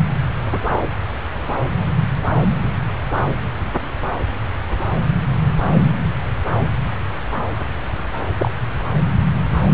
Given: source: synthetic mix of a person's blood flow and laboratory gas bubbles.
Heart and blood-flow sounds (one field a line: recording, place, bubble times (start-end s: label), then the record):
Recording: Doppler ultrasound of blood flow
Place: subclavian vein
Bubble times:
8.38-8.51 s: bubbles
From the record:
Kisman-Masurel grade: 112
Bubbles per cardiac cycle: 1 to 2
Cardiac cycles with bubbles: 1 to 10%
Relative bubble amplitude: moderate (0.250 to 0.450)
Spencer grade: 1 (occasional bubble signal discernible with the cardiac motion signal, with majority of cardiac periods free of bubbles)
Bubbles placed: anywhere in the cardiac cycle